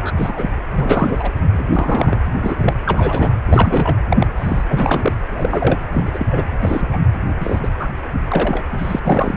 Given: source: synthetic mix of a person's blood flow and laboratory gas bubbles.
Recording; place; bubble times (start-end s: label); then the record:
Doppler ultrasound of blood flow; precordium
0.03-0.10 s: bubbles
0.17-0.50 s: bubbles
0.76-1.32 s: bubbles
1.52-1.64 s: bubbles
1.72-2.21 s: bubbles
2.42-2.73 s: bubbles
2.85-3.33 s: bubbles
3.46-3.97 s: bubbles
4.10-4.27 s: bubbles
4.36-4.64 s: bubbles
4.69-5.12 s: bubbles
5.30-5.81 s: bubbles
5.93-6.45 s: bubbles
6.61-6.87 s: bubbles
6.93-6.98 s: bubbles
7.40-7.60 s: bubbles
7.62-7.69 s: bubbles
7.79-7.89 s: bubbles
8.31-8.63 s: bubbles
8.78-8.99 s: bubbles
9.02-9.37 s: bubbles
From the record:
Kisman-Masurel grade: 243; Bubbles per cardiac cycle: several, 3 to 8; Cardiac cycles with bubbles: 100%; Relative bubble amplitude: loud (0.450 to 0.775); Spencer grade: 3 (all of the cardiac periods contain showers or single bubble signals, but not dominating or overriding the cardiac motion signals); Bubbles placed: anywhere in the cardiac cycle